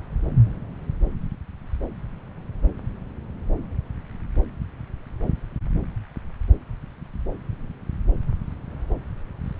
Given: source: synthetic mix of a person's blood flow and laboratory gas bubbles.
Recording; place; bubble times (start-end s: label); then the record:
Doppler ultrasound of blood flow; subclavian vein
no bubbles
From the record:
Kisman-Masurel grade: 000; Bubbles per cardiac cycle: 0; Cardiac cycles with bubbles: 0%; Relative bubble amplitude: no bubbles discernible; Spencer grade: 0 (complete lack of bubble signals)